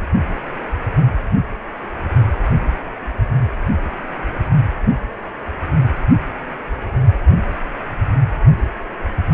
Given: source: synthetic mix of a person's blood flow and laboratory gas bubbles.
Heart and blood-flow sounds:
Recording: Doppler ultrasound of blood flow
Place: precordium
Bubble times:
no bubbles
From the record:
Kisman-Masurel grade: 000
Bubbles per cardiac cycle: 0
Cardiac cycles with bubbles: 0%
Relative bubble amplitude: no bubbles discernible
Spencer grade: 0 (complete lack of bubble signals)

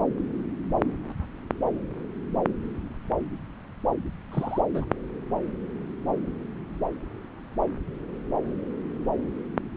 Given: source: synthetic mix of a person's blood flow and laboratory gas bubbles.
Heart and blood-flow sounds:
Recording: Doppler ultrasound of blood flow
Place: subclavian vein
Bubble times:
4.32-4.61 s: bubbles
4.74-4.84 s: bubbles
From the record:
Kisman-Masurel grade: 121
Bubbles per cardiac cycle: 1 to 2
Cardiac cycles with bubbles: 10 to 50%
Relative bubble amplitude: barely perceptible (0.100 to 0.250)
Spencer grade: 2 (many but less than half of the cardiac periods contain bubble signals, singularly or in groups)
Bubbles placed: anywhere in the cardiac cycle

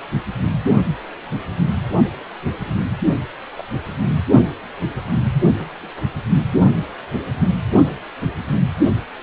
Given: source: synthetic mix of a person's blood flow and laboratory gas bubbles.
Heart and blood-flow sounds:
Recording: Doppler ultrasound of blood flow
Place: precordium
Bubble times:
2.65-2.80 s: bubbles
3.56-3.65 s: bubbles
5.58-5.70 s: bubbles
5.83-5.88 s: bubbles
From the record:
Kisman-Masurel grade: 121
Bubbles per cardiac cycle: 1 to 2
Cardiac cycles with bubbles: 10 to 50%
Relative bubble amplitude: barely perceptible (0.100 to 0.250)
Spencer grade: 2 (many but less than half of the cardiac periods contain bubble signals, singularly or in groups)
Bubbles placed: only in the low amplitude regions of the cardiac cycle

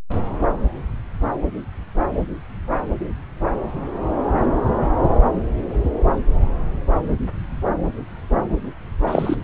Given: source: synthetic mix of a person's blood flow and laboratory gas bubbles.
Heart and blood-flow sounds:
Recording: Doppler ultrasound of blood flow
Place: subclavian vein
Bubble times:
9.06-9.36 s: bubbles
From the record:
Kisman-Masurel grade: 113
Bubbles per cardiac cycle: 1 to 2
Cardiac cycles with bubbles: 1 to 10%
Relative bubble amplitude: loud (0.450 to 0.775)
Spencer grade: 1 (occasional bubble signal discernible with the cardiac motion signal, with majority of cardiac periods free of bubbles)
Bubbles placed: anywhere in the cardiac cycle

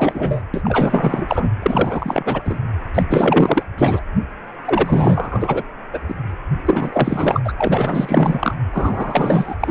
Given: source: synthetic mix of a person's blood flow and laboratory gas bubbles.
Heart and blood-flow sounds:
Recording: Doppler ultrasound of blood flow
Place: precordium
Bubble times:
0.00-0.42 s: bubbles
0.53-1.51 s: bubbles
1.62-2.42 s: bubbles
2.45-2.59 s: bubbles
2.95-3.03 s: bubbles
3.10-3.66 s: bubbles
3.78-4.02 s: bubbles
4.65-5.63 s: bubbles
5.93-6.00 s: bubbles
6.08-6.15 s: bubbles
6.66-7.53 s: bubbles
7.58-8.54 s: bubbles
8.73-9.55 s: bubbles
9.60-9.71 s: bubbles
From the record:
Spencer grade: 4 (maximum detectable bubble signal sounding continuously throughout systole and diastole of every cardiac period, and overriding the amplitude of the normal cardiac signals)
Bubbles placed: anywhere in the cardiac cycle

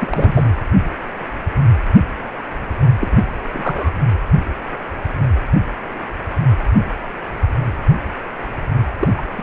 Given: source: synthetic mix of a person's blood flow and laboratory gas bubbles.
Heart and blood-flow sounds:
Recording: Doppler ultrasound of blood flow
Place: precordium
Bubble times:
0.00-0.58 s: bubbles
3.00-3.25 s: bubbles
3.52-3.90 s: bubbles
8.99-9.08 s: bubbles
9.16-9.22 s: bubbles
9.36-9.43 s: bubbles
From the record:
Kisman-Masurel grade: 222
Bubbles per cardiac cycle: several, 3 to 8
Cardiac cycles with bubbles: 10 to 50%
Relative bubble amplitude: moderate (0.250 to 0.450)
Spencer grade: 2 (many but less than half of the cardiac periods contain bubble signals, singularly or in groups)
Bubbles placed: anywhere in the cardiac cycle

